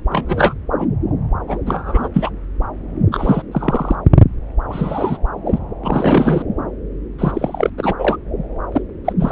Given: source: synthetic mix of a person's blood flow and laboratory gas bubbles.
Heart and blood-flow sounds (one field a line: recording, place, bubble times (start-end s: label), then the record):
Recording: Doppler ultrasound of blood flow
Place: subclavian vein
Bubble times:
0.09-0.54 s: bubbles
0.79-0.87 s: bubbles
1.47-1.58 s: bubbles
1.66-2.08 s: bubbles
2.13-2.31 s: bubbles
3.12-3.43 s: bubbles
3.52-3.96 s: bubbles
4.69-5.17 s: bubbles
5.46-5.58 s: bubbles
5.83-6.42 s: bubbles
7.18-7.70 s: bubbles
7.77-7.94 s: bubbles
7.99-8.17 s: bubbles
8.71-8.82 s: bubbles
9.04-9.13 s: bubbles
9.20-9.32 s: bubbles
From the record:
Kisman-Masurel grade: 233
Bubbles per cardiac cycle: several, 3 to 8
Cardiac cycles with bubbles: 50 to 99%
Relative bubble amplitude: loud (0.450 to 0.775)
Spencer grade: 3 (all of the cardiac periods contain showers or single bubble signals, but not dominating or overriding the cardiac motion signals)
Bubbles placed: anywhere in the cardiac cycle